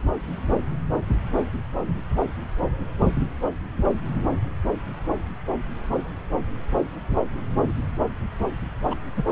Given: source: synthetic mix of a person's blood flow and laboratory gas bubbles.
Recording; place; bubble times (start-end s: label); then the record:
Doppler ultrasound of blood flow; subclavian vein
8.90-8.94 s: bubbles
9.17-9.23 s: bubbles
From the record:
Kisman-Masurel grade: 111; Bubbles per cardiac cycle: 1 to 2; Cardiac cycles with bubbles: 1 to 10%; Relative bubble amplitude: barely perceptible (0.100 to 0.250); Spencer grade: 1 (occasional bubble signal discernible with the cardiac motion signal, with majority of cardiac periods free of bubbles); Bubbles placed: anywhere in the cardiac cycle